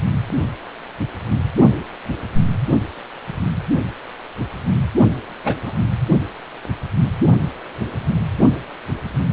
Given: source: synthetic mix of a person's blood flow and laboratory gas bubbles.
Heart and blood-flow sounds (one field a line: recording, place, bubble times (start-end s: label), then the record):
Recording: Doppler ultrasound of blood flow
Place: precordium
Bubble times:
5.44-5.56 s: bubbles
5.65-5.73 s: bubbles
From the record:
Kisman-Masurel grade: 113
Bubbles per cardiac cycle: 1 to 2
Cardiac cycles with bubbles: 1 to 10%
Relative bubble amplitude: loud (0.450 to 0.775)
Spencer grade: 1 (occasional bubble signal discernible with the cardiac motion signal, with majority of cardiac periods free of bubbles)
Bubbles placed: only in the low amplitude regions of the cardiac cycle